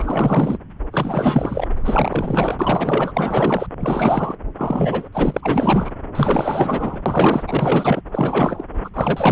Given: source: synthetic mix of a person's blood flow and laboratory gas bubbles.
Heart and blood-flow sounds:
Doppler ultrasound of blood flow; subclavian vein
0.00-0.57 s: bubbles
0.92-1.68 s: bubbles
1.76-2.56 s: bubbles
2.59-3.67 s: bubbles
3.80-4.35 s: bubbles
4.57-5.08 s: bubbles
5.12-5.91 s: bubbles
6.15-7.02 s: bubbles
7.06-7.43 s: bubbles
7.47-8.02 s: bubbles
8.12-8.66 s: bubbles
8.84-8.89 s: bubbles
8.94-9.32 s: bubbles
From the record:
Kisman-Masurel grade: 444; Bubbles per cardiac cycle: continuous sound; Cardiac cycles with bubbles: 100%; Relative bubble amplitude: maximal (0.775 to 0.999); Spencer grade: 4 (maximum detectable bubble signal sounding continuously throughout systole and diastole of every cardiac period, and overriding the amplitude of the normal cardiac signals); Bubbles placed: anywhere in the cardiac cycle

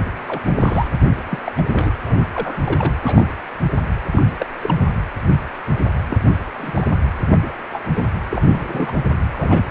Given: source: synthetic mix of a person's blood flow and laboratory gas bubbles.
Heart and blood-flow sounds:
Doppler ultrasound of blood flow; precordium
0.28-0.41 s: bubbles
0.44-0.88 s: bubbles
1.30-1.39 s: bubbles
1.46-1.52 s: bubbles
1.57-1.61 s: bubbles
1.73-1.92 s: bubbles
2.06-2.28 s: bubbles
2.35-2.57 s: bubbles
2.65-2.94 s: bubbles
3.02-3.27 s: bubbles
4.12-4.24 s: bubbles
4.38-4.46 s: bubbles
4.62-4.77 s: bubbles
6.11-6.18 s: bubbles
6.58-6.87 s: bubbles
7.31-7.38 s: bubbles
7.42-7.53 s: bubbles
7.71-7.79 s: bubbles
7.94-8.09 s: bubbles
8.30-8.95 s: bubbles
9.31-9.66 s: bubbles
From the record:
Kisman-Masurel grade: 232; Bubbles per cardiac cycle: several, 3 to 8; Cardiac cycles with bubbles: 50 to 99%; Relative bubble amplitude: moderate (0.250 to 0.450); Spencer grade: 3 (all of the cardiac periods contain showers or single bubble signals, but not dominating or overriding the cardiac motion signals); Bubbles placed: anywhere in the cardiac cycle

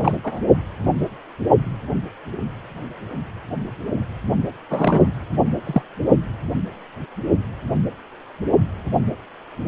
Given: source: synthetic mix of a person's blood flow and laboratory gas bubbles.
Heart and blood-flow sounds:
Doppler ultrasound of blood flow; precordium
0.00-0.17 s: bubbles
0.24-0.40 s: bubbles
4.70-5.06 s: bubbles
5.65-5.82 s: bubbles
From the record:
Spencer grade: 2 (many but less than half of the cardiac periods contain bubble signals, singularly or in groups); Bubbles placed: only in the low amplitude regions of the cardiac cycle

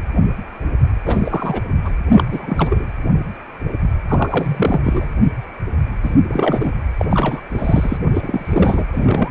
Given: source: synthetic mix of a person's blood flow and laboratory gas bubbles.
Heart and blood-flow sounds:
Doppler ultrasound of blood flow; precordium
1.05-1.61 s: bubbles
1.85-1.91 s: bubbles
2.10-2.23 s: bubbles
2.31-2.88 s: bubbles
4.08-4.81 s: bubbles
4.83-5.08 s: bubbles
6.03-6.15 s: bubbles
6.29-6.72 s: bubbles
6.97-7.05 s: bubbles
7.10-7.41 s: bubbles
7.50-7.98 s: bubbles
8.14-8.88 s: bubbles
8.92-9.31 s: bubbles
From the record:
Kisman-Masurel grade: 332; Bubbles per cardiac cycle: rolling drumbeat, 9 or more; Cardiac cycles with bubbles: 50 to 99%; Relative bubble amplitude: moderate (0.250 to 0.450); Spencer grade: 3 (all of the cardiac periods contain showers or single bubble signals, but not dominating or overriding the cardiac motion signals); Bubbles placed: anywhere in the cardiac cycle

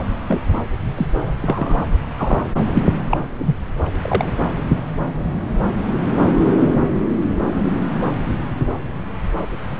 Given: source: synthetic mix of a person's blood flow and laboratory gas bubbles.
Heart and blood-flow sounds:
Doppler ultrasound of blood flow; subclavian vein
0.28-0.42 s: bubbles
0.97-1.07 s: bubbles
1.42-1.86 s: bubbles
2.17-2.42 s: bubbles
2.74-2.84 s: bubbles
3.11-3.17 s: bubbles
3.38-3.55 s: bubbles
4.01-4.31 s: bubbles
From the record:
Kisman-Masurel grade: 122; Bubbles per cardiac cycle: 1 to 2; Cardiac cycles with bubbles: 10 to 50%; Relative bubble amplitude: moderate (0.250 to 0.450); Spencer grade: 2 (many but less than half of the cardiac periods contain bubble signals, singularly or in groups); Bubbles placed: anywhere in the cardiac cycle

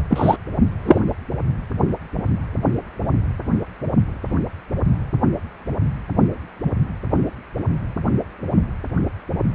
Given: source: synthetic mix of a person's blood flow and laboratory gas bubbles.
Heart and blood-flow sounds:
Doppler ultrasound of blood flow; precordium
0.10-0.36 s: bubbles
0.85-0.99 s: bubbles
From the record:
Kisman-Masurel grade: 213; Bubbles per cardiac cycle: several, 3 to 8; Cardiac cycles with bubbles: 1 to 10%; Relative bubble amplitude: loud (0.450 to 0.775); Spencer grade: 1 (occasional bubble signal discernible with the cardiac motion signal, with majority of cardiac periods free of bubbles); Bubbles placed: anywhere in the cardiac cycle

